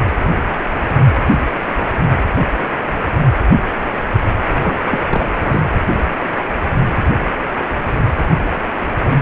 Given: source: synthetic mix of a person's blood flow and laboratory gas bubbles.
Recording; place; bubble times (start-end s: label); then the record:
Doppler ultrasound of blood flow; precordium
4.63-4.77 s: bubbles
4.85-4.98 s: bubbles
5.09-5.34 s: bubbles
5.41-5.67 s: bubbles
From the record:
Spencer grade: 1 (occasional bubble signal discernible with the cardiac motion signal, with majority of cardiac periods free of bubbles); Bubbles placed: anywhere in the cardiac cycle